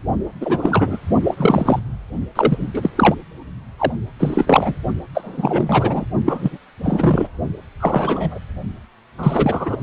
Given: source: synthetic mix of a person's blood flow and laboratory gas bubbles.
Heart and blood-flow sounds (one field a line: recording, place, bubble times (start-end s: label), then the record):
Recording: Doppler ultrasound of blood flow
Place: precordium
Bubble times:
0.41-0.97 s: bubbles
1.23-1.79 s: bubbles
2.35-2.71 s: bubbles
2.74-2.90 s: bubbles
2.97-3.15 s: bubbles
3.78-3.92 s: bubbles
4.19-4.75 s: bubbles
5.15-6.05 s: bubbles
6.25-6.58 s: bubbles
6.83-7.28 s: bubbles
7.80-8.38 s: bubbles
9.18-9.77 s: bubbles
From the record:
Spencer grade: 3 (all of the cardiac periods contain showers or single bubble signals, but not dominating or overriding the cardiac motion signals)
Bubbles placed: only in the low amplitude regions of the cardiac cycle